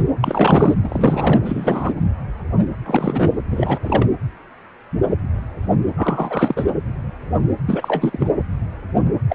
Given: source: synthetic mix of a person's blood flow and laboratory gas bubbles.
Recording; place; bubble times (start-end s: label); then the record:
Doppler ultrasound of blood flow; precordium
0.00-0.03 s: bubbles
0.20-0.74 s: bubbles
0.84-1.40 s: bubbles
1.44-1.94 s: bubbles
2.86-3.33 s: bubbles
3.50-3.79 s: bubbles
3.82-4.07 s: bubbles
5.96-6.65 s: bubbles
7.66-8.28 s: bubbles
9.29-9.35 s: bubbles
From the record:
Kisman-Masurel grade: 333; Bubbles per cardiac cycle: rolling drumbeat, 9 or more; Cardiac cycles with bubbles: 50 to 99%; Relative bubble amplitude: loud (0.450 to 0.775); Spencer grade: 3 (all of the cardiac periods contain showers or single bubble signals, but not dominating or overriding the cardiac motion signals); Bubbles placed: anywhere in the cardiac cycle